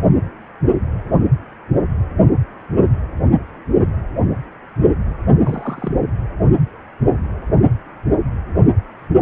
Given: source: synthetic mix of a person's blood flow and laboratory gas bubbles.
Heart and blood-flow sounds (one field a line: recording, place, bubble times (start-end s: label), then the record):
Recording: Doppler ultrasound of blood flow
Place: precordium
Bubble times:
5.44-5.92 s: bubbles
From the record:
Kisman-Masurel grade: 111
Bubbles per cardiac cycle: 1 to 2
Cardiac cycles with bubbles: 1 to 10%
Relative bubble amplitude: barely perceptible (0.100 to 0.250)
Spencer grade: 1 (occasional bubble signal discernible with the cardiac motion signal, with majority of cardiac periods free of bubbles)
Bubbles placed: only in the low amplitude regions of the cardiac cycle